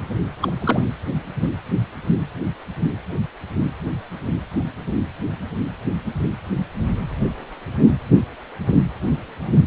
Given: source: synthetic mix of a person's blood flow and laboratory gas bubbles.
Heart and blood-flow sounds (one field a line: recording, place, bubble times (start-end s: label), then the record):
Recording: Doppler ultrasound of blood flow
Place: precordium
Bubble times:
0.42-0.52 s: bubbles
0.60-0.84 s: bubbles
1.42-1.47 s: bubbles
From the record:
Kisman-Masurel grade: 212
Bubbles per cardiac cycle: several, 3 to 8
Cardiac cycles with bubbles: 1 to 10%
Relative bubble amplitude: moderate (0.250 to 0.450)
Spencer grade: 1 (occasional bubble signal discernible with the cardiac motion signal, with majority of cardiac periods free of bubbles)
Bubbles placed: anywhere in the cardiac cycle